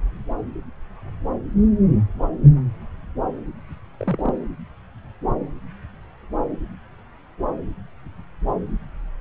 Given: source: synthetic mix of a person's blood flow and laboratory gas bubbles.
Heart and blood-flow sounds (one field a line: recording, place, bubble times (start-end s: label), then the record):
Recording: Doppler ultrasound of blood flow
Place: subclavian vein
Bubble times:
3.98-4.33 s: bubbles
From the record:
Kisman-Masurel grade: 111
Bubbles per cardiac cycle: 1 to 2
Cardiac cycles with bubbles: 1 to 10%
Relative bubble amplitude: barely perceptible (0.100 to 0.250)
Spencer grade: 1 (occasional bubble signal discernible with the cardiac motion signal, with majority of cardiac periods free of bubbles)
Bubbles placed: anywhere in the cardiac cycle